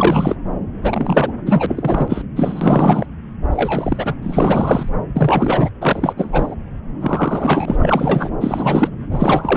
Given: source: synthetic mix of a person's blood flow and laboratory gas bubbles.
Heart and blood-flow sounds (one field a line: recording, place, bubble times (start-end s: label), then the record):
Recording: Doppler ultrasound of blood flow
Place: subclavian vein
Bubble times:
0.00-0.36 s: bubbles
0.82-1.32 s: bubbles
1.46-2.22 s: bubbles
2.35-3.06 s: bubbles
3.51-4.15 s: bubbles
4.22-4.89 s: bubbles
5.15-5.70 s: bubbles
5.81-6.13 s: bubbles
6.17-6.54 s: bubbles
7.01-8.29 s: bubbles
8.41-8.89 s: bubbles
9.11-9.57 s: bubbles
From the record:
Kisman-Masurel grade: 333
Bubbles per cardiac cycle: rolling drumbeat, 9 or more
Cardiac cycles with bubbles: 50 to 99%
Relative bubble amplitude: loud (0.450 to 0.775)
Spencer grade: 3 (all of the cardiac periods contain showers or single bubble signals, but not dominating or overriding the cardiac motion signals)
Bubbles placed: anywhere in the cardiac cycle